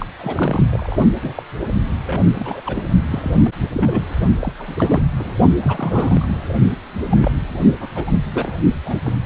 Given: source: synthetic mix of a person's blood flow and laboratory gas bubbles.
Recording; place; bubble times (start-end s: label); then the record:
Doppler ultrasound of blood flow; precordium
0.00-0.05 s: bubbles
0.19-0.96 s: bubbles
1.22-1.42 s: bubbles
2.05-2.61 s: bubbles
2.65-2.82 s: bubbles
3.10-3.51 s: bubbles
3.72-4.06 s: bubbles
4.39-4.52 s: bubbles
4.58-5.02 s: bubbles
5.19-5.30 s: bubbles
5.62-6.39 s: bubbles
7.10-7.31 s: bubbles
7.81-7.88 s: bubbles
7.94-8.04 s: bubbles
8.07-8.12 s: bubbles
8.33-8.52 s: bubbles
8.85-8.99 s: bubbles
9.03-9.12 s: bubbles
From the record:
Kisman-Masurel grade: 342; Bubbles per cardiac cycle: rolling drumbeat, 9 or more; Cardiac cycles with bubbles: 100%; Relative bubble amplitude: moderate (0.250 to 0.450); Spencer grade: 3 (all of the cardiac periods contain showers or single bubble signals, but not dominating or overriding the cardiac motion signals); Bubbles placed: only in the low amplitude regions of the cardiac cycle